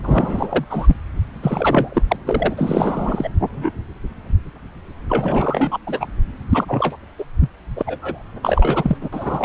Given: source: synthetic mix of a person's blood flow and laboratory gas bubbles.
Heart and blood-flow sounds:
Doppler ultrasound of blood flow; subclavian vein
0.02-0.65 s: bubbles
0.70-0.95 s: bubbles
1.42-2.02 s: bubbles
2.08-2.17 s: bubbles
2.25-3.29 s: bubbles
3.56-3.70 s: bubbles
5.09-5.78 s: bubbles
5.87-6.08 s: bubbles
6.50-6.96 s: bubbles
7.18-7.24 s: bubbles
7.40-7.50 s: bubbles
7.76-7.83 s: bubbles
7.86-8.22 s: bubbles
8.42-8.97 s: bubbles
9.01-9.09 s: bubbles
9.12-9.45 s: bubbles
From the record:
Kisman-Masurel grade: 333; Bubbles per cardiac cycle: rolling drumbeat, 9 or more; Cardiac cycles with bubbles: 50 to 99%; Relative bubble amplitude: loud (0.450 to 0.775); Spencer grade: 3 (all of the cardiac periods contain showers or single bubble signals, but not dominating or overriding the cardiac motion signals); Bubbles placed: anywhere in the cardiac cycle

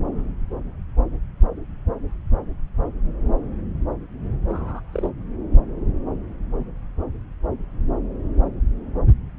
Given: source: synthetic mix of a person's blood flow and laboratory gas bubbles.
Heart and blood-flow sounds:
Doppler ultrasound of blood flow; subclavian vein
4.50-4.80 s: bubbles
4.92-5.09 s: bubbles
From the record:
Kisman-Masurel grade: 111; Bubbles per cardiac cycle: 1 to 2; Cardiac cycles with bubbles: 1 to 10%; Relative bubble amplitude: barely perceptible (0.100 to 0.250); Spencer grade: 1 (occasional bubble signal discernible with the cardiac motion signal, with majority of cardiac periods free of bubbles); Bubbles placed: anywhere in the cardiac cycle

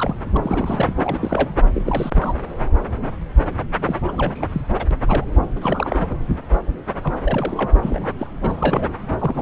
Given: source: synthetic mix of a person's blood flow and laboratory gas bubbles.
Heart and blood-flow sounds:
Doppler ultrasound of blood flow; subclavian vein
0.00-0.15 s: bubbles
0.34-0.37 s: bubbles
0.42-0.93 s: bubbles
1.04-1.52 s: bubbles
1.74-2.10 s: bubbles
2.15-2.35 s: bubbles
3.85-3.96 s: bubbles
4.08-4.62 s: bubbles
4.75-4.86 s: bubbles
4.91-4.95 s: bubbles
5.07-5.25 s: bubbles
5.42-5.47 s: bubbles
5.56-6.14 s: bubbles
7.04-7.13 s: bubbles
7.24-7.72 s: bubbles
7.82-8.08 s: bubbles
8.19-8.27 s: bubbles
8.42-8.93 s: bubbles
9.18-9.41 s: bubbles
From the record:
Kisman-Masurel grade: 332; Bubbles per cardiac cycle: rolling drumbeat, 9 or more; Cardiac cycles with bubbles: 50 to 99%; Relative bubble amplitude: moderate (0.250 to 0.450); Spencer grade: 3 (all of the cardiac periods contain showers or single bubble signals, but not dominating or overriding the cardiac motion signals); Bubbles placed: anywhere in the cardiac cycle

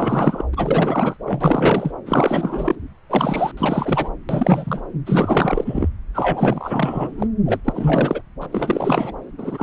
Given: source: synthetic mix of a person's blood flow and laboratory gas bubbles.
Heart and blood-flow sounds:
Doppler ultrasound of blood flow; subclavian vein
0.00-0.43 s: bubbles
0.53-1.17 s: bubbles
1.25-1.92 s: bubbles
2.06-2.76 s: bubbles
3.10-3.52 s: bubbles
3.57-4.10 s: bubbles
4.29-4.81 s: bubbles
5.06-5.88 s: bubbles
6.14-7.27 s: bubbles
7.46-7.60 s: bubbles
7.64-8.23 s: bubbles
8.41-8.46 s: bubbles
8.52-9.12 s: bubbles
9.37-9.63 s: bubbles
From the record:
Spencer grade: 4 (maximum detectable bubble signal sounding continuously throughout systole and diastole of every cardiac period, and overriding the amplitude of the normal cardiac signals); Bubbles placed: anywhere in the cardiac cycle

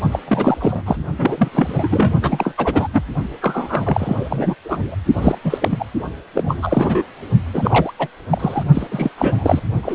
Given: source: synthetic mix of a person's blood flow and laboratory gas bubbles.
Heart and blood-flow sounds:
Doppler ultrasound of blood flow; precordium
0.12-0.20 s: bubbles
0.28-0.57 s: bubbles
0.60-0.82 s: bubbles
0.85-0.97 s: bubbles
1.18-1.49 s: bubbles
1.51-2.13 s: bubbles
2.21-2.53 s: bubbles
2.57-2.88 s: bubbles
2.92-3.02 s: bubbles
3.42-4.55 s: bubbles
4.64-4.95 s: bubbles
5.13-5.37 s: bubbles
5.44-5.58 s: bubbles
5.62-5.86 s: bubbles
6.34-7.04 s: bubbles
7.54-7.92 s: bubbles
7.99-8.07 s: bubbles
8.31-8.63 s: bubbles
8.74-8.87 s: bubbles
8.91-9.09 s: bubbles
9.18-9.62 s: bubbles
9.82-9.95 s: bubbles
From the record:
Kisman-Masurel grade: 343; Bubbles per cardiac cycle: rolling drumbeat, 9 or more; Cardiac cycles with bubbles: 100%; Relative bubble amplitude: loud (0.450 to 0.775); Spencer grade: 3 (all of the cardiac periods contain showers or single bubble signals, but not dominating or overriding the cardiac motion signals); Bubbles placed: only in the low amplitude regions of the cardiac cycle

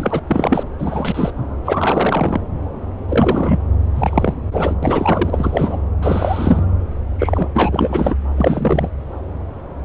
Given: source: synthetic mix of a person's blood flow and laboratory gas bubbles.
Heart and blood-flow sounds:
Doppler ultrasound of blood flow; subclavian vein
0.00-0.20 s: bubbles
0.27-0.64 s: bubbles
0.78-1.31 s: bubbles
1.65-2.40 s: bubbles
3.08-3.60 s: bubbles
3.94-4.34 s: bubbles
4.51-4.75 s: bubbles
4.83-5.79 s: bubbles
6.02-6.64 s: bubbles
7.19-7.48 s: bubbles
7.54-8.15 s: bubbles
8.37-8.88 s: bubbles
From the record:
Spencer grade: 3 (all of the cardiac periods contain showers or single bubble signals, but not dominating or overriding the cardiac motion signals); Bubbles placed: anywhere in the cardiac cycle

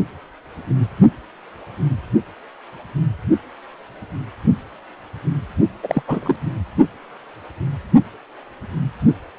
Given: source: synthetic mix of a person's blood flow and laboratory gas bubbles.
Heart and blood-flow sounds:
Doppler ultrasound of blood flow; precordium
5.83-6.03 s: bubbles
6.07-6.36 s: bubbles
From the record:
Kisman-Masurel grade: 222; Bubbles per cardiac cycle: several, 3 to 8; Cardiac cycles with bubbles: 10 to 50%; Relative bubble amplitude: moderate (0.250 to 0.450); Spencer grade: 2 (many but less than half of the cardiac periods contain bubble signals, singularly or in groups); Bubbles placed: only in the low amplitude regions of the cardiac cycle

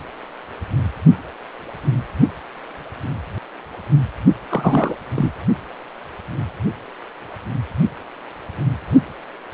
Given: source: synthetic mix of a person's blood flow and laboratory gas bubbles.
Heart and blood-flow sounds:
Doppler ultrasound of blood flow; precordium
4.49-4.95 s: bubbles
5.15-5.33 s: bubbles
From the record:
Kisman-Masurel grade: 212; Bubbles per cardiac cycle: several, 3 to 8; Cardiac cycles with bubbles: 1 to 10%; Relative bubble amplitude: moderate (0.250 to 0.450); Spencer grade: 1 (occasional bubble signal discernible with the cardiac motion signal, with majority of cardiac periods free of bubbles); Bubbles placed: only in the low amplitude regions of the cardiac cycle

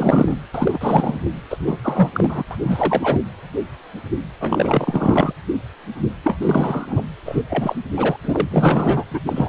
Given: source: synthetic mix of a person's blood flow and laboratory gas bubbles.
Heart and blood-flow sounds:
Doppler ultrasound of blood flow; precordium
0.00-0.38 s: bubbles
0.54-1.19 s: bubbles
1.24-1.30 s: bubbles
1.49-1.79 s: bubbles
1.83-2.09 s: bubbles
2.13-2.44 s: bubbles
2.50-2.58 s: bubbles
2.61-3.21 s: bubbles
4.40-5.32 s: bubbles
6.24-6.37 s: bubbles
6.41-7.03 s: bubbles
7.25-7.42 s: bubbles
7.50-7.75 s: bubbles
7.96-8.16 s: bubbles
8.22-9.04 s: bubbles
9.11-9.19 s: bubbles
9.27-9.49 s: bubbles
From the record:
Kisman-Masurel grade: 333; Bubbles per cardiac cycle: rolling drumbeat, 9 or more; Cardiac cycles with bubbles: 50 to 99%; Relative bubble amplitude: loud (0.450 to 0.775); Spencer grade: 3 (all of the cardiac periods contain showers or single bubble signals, but not dominating or overriding the cardiac motion signals); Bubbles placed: anywhere in the cardiac cycle

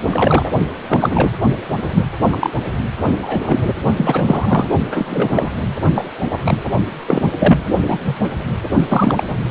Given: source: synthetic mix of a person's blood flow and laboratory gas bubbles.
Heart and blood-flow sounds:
Doppler ultrasound of blood flow; precordium
0.10-0.50 s: bubbles
0.88-1.31 s: bubbles
1.94-2.03 s: bubbles
2.30-2.50 s: bubbles
3.19-3.61 s: bubbles
3.96-4.67 s: bubbles
4.91-5.50 s: bubbles
5.95-6.10 s: bubbles
6.29-6.66 s: bubbles
7.07-7.28 s: bubbles
7.39-7.67 s: bubbles
7.82-8.20 s: bubbles
8.23-8.29 s: bubbles
8.88-9.42 s: bubbles
From the record:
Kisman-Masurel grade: 243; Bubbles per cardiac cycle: several, 3 to 8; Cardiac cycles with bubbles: 100%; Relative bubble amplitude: loud (0.450 to 0.775); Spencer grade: 3 (all of the cardiac periods contain showers or single bubble signals, but not dominating or overriding the cardiac motion signals); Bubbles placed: only in the low amplitude regions of the cardiac cycle

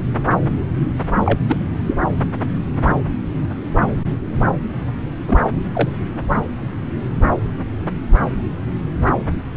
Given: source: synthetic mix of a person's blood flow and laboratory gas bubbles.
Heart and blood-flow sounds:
Doppler ultrasound of blood flow; subclavian vein
1.25-1.39 s: bubbles
1.48-1.64 s: bubbles
1.87-1.95 s: bubbles
5.28-5.38 s: bubbles
5.73-5.89 s: bubbles
From the record:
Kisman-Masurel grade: 222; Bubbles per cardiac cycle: several, 3 to 8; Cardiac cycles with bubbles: 10 to 50%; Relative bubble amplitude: moderate (0.250 to 0.450); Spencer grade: 2 (many but less than half of the cardiac periods contain bubble signals, singularly or in groups); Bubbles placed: anywhere in the cardiac cycle

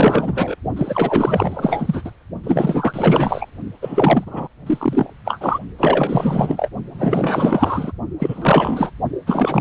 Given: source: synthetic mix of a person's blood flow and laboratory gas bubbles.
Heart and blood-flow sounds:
Doppler ultrasound of blood flow; precordium
0.00-0.55 s: bubbles
0.76-2.11 s: bubbles
2.44-3.46 s: bubbles
3.81-4.48 s: bubbles
4.66-5.12 s: bubbles
5.25-5.59 s: bubbles
5.78-6.70 s: bubbles
6.94-7.92 s: bubbles
8.19-8.91 s: bubbles
9.27-9.61 s: bubbles
From the record:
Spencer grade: 4 (maximum detectable bubble signal sounding continuously throughout systole and diastole of every cardiac period, and overriding the amplitude of the normal cardiac signals); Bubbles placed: only in the low amplitude regions of the cardiac cycle

